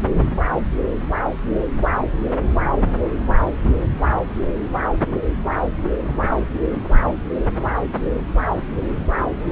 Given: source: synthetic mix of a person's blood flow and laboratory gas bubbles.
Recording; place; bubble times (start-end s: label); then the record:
Doppler ultrasound of blood flow; subclavian vein
no bubbles
From the record:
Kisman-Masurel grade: 000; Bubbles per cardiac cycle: 0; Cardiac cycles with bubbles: 0%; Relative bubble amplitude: no bubbles discernible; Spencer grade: 0 (complete lack of bubble signals)